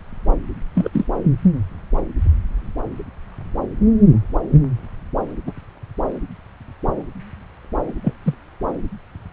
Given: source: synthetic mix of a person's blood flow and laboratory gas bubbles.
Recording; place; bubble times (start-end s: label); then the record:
Doppler ultrasound of blood flow; subclavian vein
0.75-0.90 s: bubbles
0.93-1.06 s: bubbles
5.46-5.52 s: bubbles
8.04-8.13 s: bubbles
8.23-8.34 s: bubbles
From the record:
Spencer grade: 2 (many but less than half of the cardiac periods contain bubble signals, singularly or in groups); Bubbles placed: anywhere in the cardiac cycle